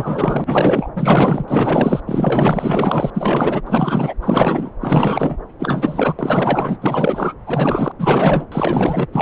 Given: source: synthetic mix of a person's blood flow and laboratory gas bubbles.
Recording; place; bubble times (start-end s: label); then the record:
Doppler ultrasound of blood flow; subclavian vein
0.00-0.89 s: bubbles
0.95-2.00 s: bubbles
2.06-3.10 s: bubbles
3.14-3.61 s: bubbles
3.67-4.14 s: bubbles
4.21-4.71 s: bubbles
4.80-5.37 s: bubbles
5.59-6.15 s: bubbles
6.18-6.77 s: bubbles
6.81-7.33 s: bubbles
7.46-7.92 s: bubbles
7.98-8.46 s: bubbles
8.51-9.06 s: bubbles
9.12-9.22 s: bubbles
From the record:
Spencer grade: 4 (maximum detectable bubble signal sounding continuously throughout systole and diastole of every cardiac period, and overriding the amplitude of the normal cardiac signals); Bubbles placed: anywhere in the cardiac cycle